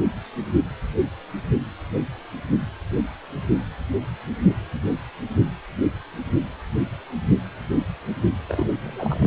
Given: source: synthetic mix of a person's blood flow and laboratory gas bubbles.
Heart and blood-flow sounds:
Doppler ultrasound of blood flow; precordium
8.48-8.66 s: bubbles
8.81-9.27 s: bubbles
From the record:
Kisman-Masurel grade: 211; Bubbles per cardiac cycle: several, 3 to 8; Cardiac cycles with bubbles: 1 to 10%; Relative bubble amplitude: barely perceptible (0.100 to 0.250); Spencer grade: 1 (occasional bubble signal discernible with the cardiac motion signal, with majority of cardiac periods free of bubbles); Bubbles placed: anywhere in the cardiac cycle

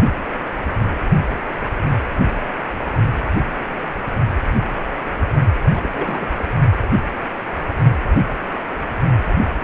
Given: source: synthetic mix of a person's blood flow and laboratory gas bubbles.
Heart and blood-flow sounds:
Doppler ultrasound of blood flow; precordium
5.74-5.89 s: bubbles
5.93-6.27 s: bubbles
6.38-6.44 s: bubbles
From the record:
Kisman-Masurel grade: 211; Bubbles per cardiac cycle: several, 3 to 8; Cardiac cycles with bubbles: 1 to 10%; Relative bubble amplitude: barely perceptible (0.100 to 0.250); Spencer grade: 1 (occasional bubble signal discernible with the cardiac motion signal, with majority of cardiac periods free of bubbles); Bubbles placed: anywhere in the cardiac cycle

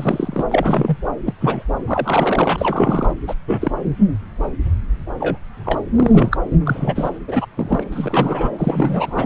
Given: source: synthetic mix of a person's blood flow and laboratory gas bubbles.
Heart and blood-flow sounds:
Doppler ultrasound of blood flow; subclavian vein
0.00-0.46 s: bubbles
0.51-0.97 s: bubbles
1.26-1.34 s: bubbles
1.41-1.64 s: bubbles
1.87-3.13 s: bubbles
3.27-3.34 s: bubbles
3.47-3.71 s: bubbles
5.20-5.37 s: bubbles
5.64-5.80 s: bubbles
5.95-6.37 s: bubbles
6.65-7.09 s: bubbles
7.27-7.46 s: bubbles
7.55-7.84 s: bubbles
7.91-8.50 s: bubbles
8.58-9.26 s: bubbles
From the record:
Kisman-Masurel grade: 232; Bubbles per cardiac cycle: several, 3 to 8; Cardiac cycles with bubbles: 50 to 99%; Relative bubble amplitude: moderate (0.250 to 0.450); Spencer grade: 3 (all of the cardiac periods contain showers or single bubble signals, but not dominating or overriding the cardiac motion signals); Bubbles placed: anywhere in the cardiac cycle

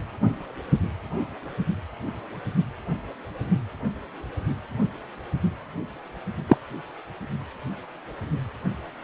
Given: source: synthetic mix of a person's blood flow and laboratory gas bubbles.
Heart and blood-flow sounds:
Doppler ultrasound of blood flow; precordium
6.47-6.57 s: bubbles
From the record:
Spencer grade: 1 (occasional bubble signal discernible with the cardiac motion signal, with majority of cardiac periods free of bubbles); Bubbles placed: only in the low amplitude regions of the cardiac cycle

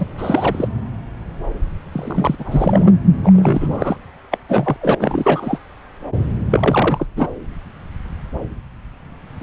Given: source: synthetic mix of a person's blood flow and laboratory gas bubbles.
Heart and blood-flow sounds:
Doppler ultrasound of blood flow; subclavian vein
0.00-0.07 s: bubbles
0.18-0.68 s: bubbles
1.92-2.35 s: bubbles
2.39-2.92 s: bubbles
3.23-3.97 s: bubbles
4.31-4.38 s: bubbles
4.49-4.76 s: bubbles
4.81-4.95 s: bubbles
4.99-5.58 s: bubbles
6.51-7.07 s: bubbles
7.16-7.28 s: bubbles
9.40-9.43 s: bubbles
From the record:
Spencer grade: 3 (all of the cardiac periods contain showers or single bubble signals, but not dominating or overriding the cardiac motion signals); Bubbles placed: anywhere in the cardiac cycle

